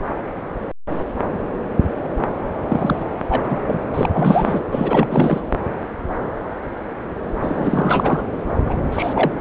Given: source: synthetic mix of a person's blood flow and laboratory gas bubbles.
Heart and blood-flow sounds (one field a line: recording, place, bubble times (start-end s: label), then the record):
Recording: Doppler ultrasound of blood flow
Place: subclavian vein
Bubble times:
2.68-3.04 s: bubbles
3.29-3.60 s: bubbles
3.66-3.80 s: bubbles
3.94-4.09 s: bubbles
4.13-4.63 s: bubbles
4.72-5.40 s: bubbles
7.42-8.22 s: bubbles
8.66-8.77 s: bubbles
8.92-9.31 s: bubbles
From the record:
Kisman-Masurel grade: 333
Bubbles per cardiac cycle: rolling drumbeat, 9 or more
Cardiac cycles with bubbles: 50 to 99%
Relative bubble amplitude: loud (0.450 to 0.775)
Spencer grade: 3 (all of the cardiac periods contain showers or single bubble signals, but not dominating or overriding the cardiac motion signals)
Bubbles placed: anywhere in the cardiac cycle